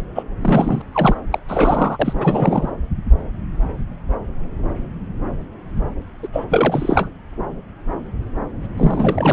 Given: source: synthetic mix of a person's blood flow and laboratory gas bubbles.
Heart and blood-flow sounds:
Doppler ultrasound of blood flow; subclavian vein
0.15-0.23 s: bubbles
0.41-0.82 s: bubbles
0.92-1.16 s: bubbles
1.31-1.40 s: bubbles
1.47-2.13 s: bubbles
2.17-2.69 s: bubbles
6.22-6.28 s: bubbles
6.33-6.45 s: bubbles
6.49-7.08 s: bubbles
8.78-9.32 s: bubbles
From the record:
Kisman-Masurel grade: 333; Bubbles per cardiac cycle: rolling drumbeat, 9 or more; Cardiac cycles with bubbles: 50 to 99%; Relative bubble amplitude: loud (0.450 to 0.775); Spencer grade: 3 (all of the cardiac periods contain showers or single bubble signals, but not dominating or overriding the cardiac motion signals); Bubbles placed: anywhere in the cardiac cycle

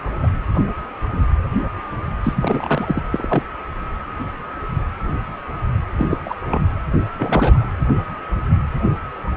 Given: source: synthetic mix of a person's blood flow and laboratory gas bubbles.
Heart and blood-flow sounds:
Doppler ultrasound of blood flow; precordium
0.23-0.28 s: bubbles
2.23-3.02 s: bubbles
3.12-3.43 s: bubbles
5.97-6.07 s: bubbles
6.10-6.17 s: bubbles
6.25-6.35 s: bubbles
6.47-6.65 s: bubbles
7.19-7.65 s: bubbles
From the record:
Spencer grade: 2 (many but less than half of the cardiac periods contain bubble signals, singularly or in groups); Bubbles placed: anywhere in the cardiac cycle

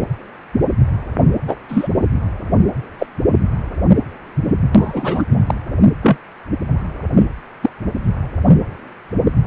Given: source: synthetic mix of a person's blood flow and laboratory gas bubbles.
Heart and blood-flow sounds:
Doppler ultrasound of blood flow; precordium
0.00-0.02 s: bubbles
1.47-1.56 s: bubbles
1.69-1.88 s: bubbles
2.99-3.07 s: bubbles
4.73-5.23 s: bubbles
5.46-5.54 s: bubbles
6.01-6.17 s: bubbles
7.16-7.23 s: bubbles
7.62-7.69 s: bubbles
From the record:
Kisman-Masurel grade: 123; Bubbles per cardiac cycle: 1 to 2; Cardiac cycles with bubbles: 10 to 50%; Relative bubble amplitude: loud (0.450 to 0.775); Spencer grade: 2 (many but less than half of the cardiac periods contain bubble signals, singularly or in groups); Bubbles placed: anywhere in the cardiac cycle

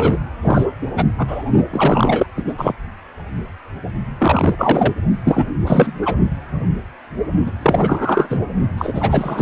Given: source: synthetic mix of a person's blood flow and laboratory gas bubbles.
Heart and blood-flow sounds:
Doppler ultrasound of blood flow; precordium
0.00-0.17 s: bubbles
0.42-0.66 s: bubbles
0.97-1.04 s: bubbles
1.18-1.44 s: bubbles
1.70-2.26 s: bubbles
2.37-2.43 s: bubbles
2.47-2.54 s: bubbles
2.58-2.72 s: bubbles
4.18-4.93 s: bubbles
5.24-5.44 s: bubbles
5.64-5.93 s: bubbles
6.02-6.17 s: bubbles
7.46-7.51 s: bubbles
7.62-8.39 s: bubbles
8.78-9.42 s: bubbles
From the record:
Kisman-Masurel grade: 333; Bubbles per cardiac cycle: rolling drumbeat, 9 or more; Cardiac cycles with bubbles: 50 to 99%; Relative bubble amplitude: loud (0.450 to 0.775); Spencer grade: 3 (all of the cardiac periods contain showers or single bubble signals, but not dominating or overriding the cardiac motion signals); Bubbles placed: only in the low amplitude regions of the cardiac cycle

